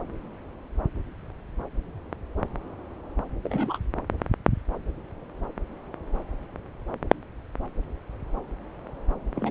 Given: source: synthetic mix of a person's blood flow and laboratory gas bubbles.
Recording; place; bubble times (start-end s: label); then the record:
Doppler ultrasound of blood flow; subclavian vein
3.44-3.78 s: bubbles
9.35-9.51 s: bubbles
From the record:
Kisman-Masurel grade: 221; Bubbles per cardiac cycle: several, 3 to 8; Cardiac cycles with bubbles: 10 to 50%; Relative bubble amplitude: barely perceptible (0.100 to 0.250); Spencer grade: 2 (many but less than half of the cardiac periods contain bubble signals, singularly or in groups); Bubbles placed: anywhere in the cardiac cycle